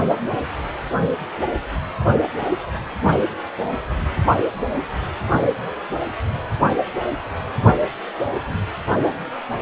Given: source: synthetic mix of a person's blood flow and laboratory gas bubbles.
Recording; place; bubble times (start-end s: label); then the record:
Doppler ultrasound of blood flow; precordium
no bubbles
From the record:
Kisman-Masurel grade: 000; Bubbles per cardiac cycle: 0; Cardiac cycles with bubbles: 0%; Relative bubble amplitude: no bubbles discernible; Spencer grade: 0 (complete lack of bubble signals)